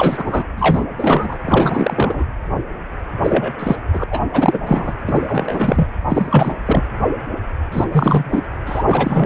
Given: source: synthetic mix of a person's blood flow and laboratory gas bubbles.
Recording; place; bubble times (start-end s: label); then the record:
Doppler ultrasound of blood flow; precordium
0.00-0.44 s: bubbles
0.57-0.84 s: bubbles
0.98-1.38 s: bubbles
1.46-2.25 s: bubbles
3.23-3.54 s: bubbles
3.59-3.76 s: bubbles
3.93-4.04 s: bubbles
4.11-4.20 s: bubbles
4.33-4.59 s: bubbles
4.66-4.93 s: bubbles
5.07-5.86 s: bubbles
6.08-6.54 s: bubbles
6.65-6.83 s: bubbles
7.72-7.84 s: bubbles
7.92-8.42 s: bubbles
8.66-9.26 s: bubbles
From the record:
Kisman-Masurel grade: 333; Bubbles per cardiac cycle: rolling drumbeat, 9 or more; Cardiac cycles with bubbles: 50 to 99%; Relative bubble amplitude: loud (0.450 to 0.775); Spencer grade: 3 (all of the cardiac periods contain showers or single bubble signals, but not dominating or overriding the cardiac motion signals); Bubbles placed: anywhere in the cardiac cycle